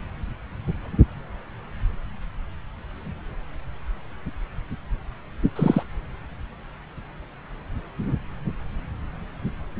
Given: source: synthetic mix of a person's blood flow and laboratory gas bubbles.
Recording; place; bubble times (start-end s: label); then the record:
Doppler ultrasound of blood flow; subclavian vein
5.55-5.83 s: bubbles
From the record:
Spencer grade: 1 (occasional bubble signal discernible with the cardiac motion signal, with majority of cardiac periods free of bubbles); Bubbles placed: anywhere in the cardiac cycle